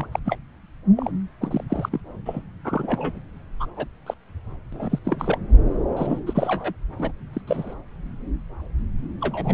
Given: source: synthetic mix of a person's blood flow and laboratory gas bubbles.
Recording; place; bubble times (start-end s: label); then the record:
Doppler ultrasound of blood flow; subclavian vein
0.00-0.06 s: bubbles
0.12-0.19 s: bubbles
0.25-0.38 s: bubbles
0.96-1.11 s: bubbles
1.41-1.64 s: bubbles
1.70-2.00 s: bubbles
2.25-2.43 s: bubbles
2.65-3.21 s: bubbles
3.60-3.67 s: bubbles
3.76-3.88 s: bubbles
4.06-4.14 s: bubbles
4.72-4.99 s: bubbles
5.04-5.38 s: bubbles
5.96-6.20 s: bubbles
6.26-6.73 s: bubbles
6.98-7.12 s: bubbles
7.33-7.42 s: bubbles
7.47-7.74 s: bubbles
9.21-9.54 s: bubbles
From the record:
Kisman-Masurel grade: 232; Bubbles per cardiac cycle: several, 3 to 8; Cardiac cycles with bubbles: 50 to 99%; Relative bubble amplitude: moderate (0.250 to 0.450); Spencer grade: 3 (all of the cardiac periods contain showers or single bubble signals, but not dominating or overriding the cardiac motion signals); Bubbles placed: anywhere in the cardiac cycle